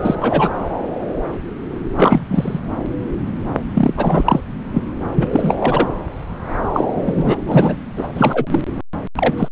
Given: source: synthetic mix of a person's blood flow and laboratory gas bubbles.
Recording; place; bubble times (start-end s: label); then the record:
Doppler ultrasound of blood flow; subclavian vein
0.00-0.15 s: bubbles
0.21-0.49 s: bubbles
1.96-2.59 s: bubbles
3.74-3.94 s: bubbles
3.97-4.40 s: bubbles
4.74-4.82 s: bubbles
5.16-5.27 s: bubbles
5.33-5.55 s: bubbles
5.59-5.88 s: bubbles
6.73-6.85 s: bubbles
6.95-7.37 s: bubbles
7.46-7.77 s: bubbles
7.97-8.07 s: bubbles
8.13-8.46 s: bubbles
8.50-8.59 s: bubbles
9.15-9.34 s: bubbles
9.37-9.48 s: bubbles
From the record:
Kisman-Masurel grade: 233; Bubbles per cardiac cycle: several, 3 to 8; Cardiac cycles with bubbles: 50 to 99%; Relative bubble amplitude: loud (0.450 to 0.775); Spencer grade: 3 (all of the cardiac periods contain showers or single bubble signals, but not dominating or overriding the cardiac motion signals); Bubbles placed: anywhere in the cardiac cycle